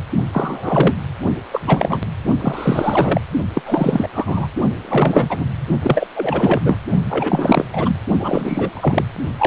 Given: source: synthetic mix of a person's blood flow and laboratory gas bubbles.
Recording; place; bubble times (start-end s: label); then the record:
Doppler ultrasound of blood flow; precordium
0.32-0.95 s: bubbles
1.52-1.60 s: bubbles
1.66-2.01 s: bubbles
2.41-3.21 s: bubbles
3.54-3.62 s: bubbles
3.66-4.08 s: bubbles
4.13-4.48 s: bubbles
4.83-5.45 s: bubbles
5.82-6.08 s: bubbles
6.16-6.61 s: bubbles
6.64-6.79 s: bubbles
7.09-7.65 s: bubbles
7.72-7.96 s: bubbles
8.19-9.04 s: bubbles
9.39-9.47 s: bubbles
From the record:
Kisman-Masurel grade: 343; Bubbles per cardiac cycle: rolling drumbeat, 9 or more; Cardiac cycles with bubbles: 100%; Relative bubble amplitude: loud (0.450 to 0.775); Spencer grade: 3 (all of the cardiac periods contain showers or single bubble signals, but not dominating or overriding the cardiac motion signals); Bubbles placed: only in the low amplitude regions of the cardiac cycle